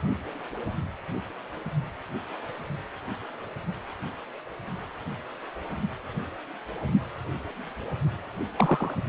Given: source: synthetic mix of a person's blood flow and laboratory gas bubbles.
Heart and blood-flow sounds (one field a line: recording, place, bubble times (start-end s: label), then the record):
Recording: Doppler ultrasound of blood flow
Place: precordium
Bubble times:
8.58-8.94 s: bubbles
From the record:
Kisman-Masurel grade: 211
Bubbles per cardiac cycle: several, 3 to 8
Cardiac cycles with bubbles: 1 to 10%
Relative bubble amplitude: barely perceptible (0.100 to 0.250)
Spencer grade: 1 (occasional bubble signal discernible with the cardiac motion signal, with majority of cardiac periods free of bubbles)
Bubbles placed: anywhere in the cardiac cycle